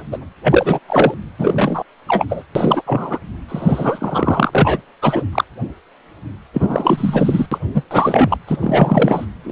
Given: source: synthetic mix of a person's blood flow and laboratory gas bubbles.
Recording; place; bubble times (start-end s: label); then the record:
Doppler ultrasound of blood flow; precordium
0.00-0.02 s: bubbles
0.11-0.17 s: bubbles
0.42-0.79 s: bubbles
0.89-1.14 s: bubbles
1.39-1.83 s: bubbles
2.08-2.25 s: bubbles
2.29-2.44 s: bubbles
2.55-2.82 s: bubbles
2.86-3.19 s: bubbles
3.49-4.81 s: bubbles
5.02-5.25 s: bubbles
5.32-5.44 s: bubbles
6.53-7.46 s: bubbles
7.51-7.58 s: bubbles
7.74-7.83 s: bubbles
7.90-8.38 s: bubbles
8.46-9.26 s: bubbles
9.44-9.52 s: bubbles
From the record:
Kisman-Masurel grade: 333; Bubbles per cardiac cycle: rolling drumbeat, 9 or more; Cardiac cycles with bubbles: 50 to 99%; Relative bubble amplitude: loud (0.450 to 0.775); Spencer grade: 3 (all of the cardiac periods contain showers or single bubble signals, but not dominating or overriding the cardiac motion signals); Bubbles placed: anywhere in the cardiac cycle